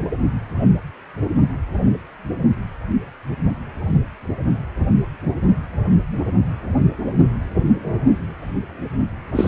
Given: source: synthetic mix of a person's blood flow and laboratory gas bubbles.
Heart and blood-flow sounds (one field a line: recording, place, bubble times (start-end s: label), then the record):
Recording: Doppler ultrasound of blood flow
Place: precordium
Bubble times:
9.35-9.48 s: bubbles
From the record:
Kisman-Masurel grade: 223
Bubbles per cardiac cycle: several, 3 to 8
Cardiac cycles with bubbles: 10 to 50%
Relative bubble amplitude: loud (0.450 to 0.775)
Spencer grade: 2 (many but less than half of the cardiac periods contain bubble signals, singularly or in groups)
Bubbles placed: anywhere in the cardiac cycle